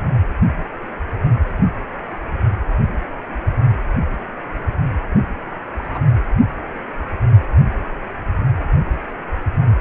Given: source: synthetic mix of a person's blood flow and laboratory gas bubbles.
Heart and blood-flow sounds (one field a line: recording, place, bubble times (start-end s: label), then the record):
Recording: Doppler ultrasound of blood flow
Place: precordium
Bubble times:
5.78-5.99 s: bubbles
From the record:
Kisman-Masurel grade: 121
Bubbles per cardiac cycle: 1 to 2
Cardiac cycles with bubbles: 10 to 50%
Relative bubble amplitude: barely perceptible (0.100 to 0.250)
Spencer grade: 2 (many but less than half of the cardiac periods contain bubble signals, singularly or in groups)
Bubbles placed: only in the low amplitude regions of the cardiac cycle